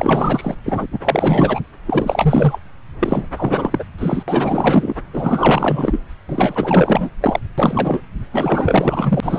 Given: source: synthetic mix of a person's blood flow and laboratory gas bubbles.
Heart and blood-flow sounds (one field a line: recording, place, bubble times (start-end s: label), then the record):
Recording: Doppler ultrasound of blood flow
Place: subclavian vein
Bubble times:
0.00-0.56 s: bubbles
0.65-0.87 s: bubbles
0.92-0.99 s: bubbles
1.04-1.60 s: bubbles
1.87-2.59 s: bubbles
2.99-3.27 s: bubbles
3.37-3.84 s: bubbles
3.98-4.23 s: bubbles
4.27-4.95 s: bubbles
5.13-6.00 s: bubbles
6.28-7.09 s: bubbles
7.21-7.40 s: bubbles
7.57-8.01 s: bubbles
8.32-9.39 s: bubbles
From the record:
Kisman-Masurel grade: 444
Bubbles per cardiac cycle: continuous sound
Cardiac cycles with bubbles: 100%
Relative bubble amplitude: maximal (0.775 to 0.999)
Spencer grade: 4 (maximum detectable bubble signal sounding continuously throughout systole and diastole of every cardiac period, and overriding the amplitude of the normal cardiac signals)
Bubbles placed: anywhere in the cardiac cycle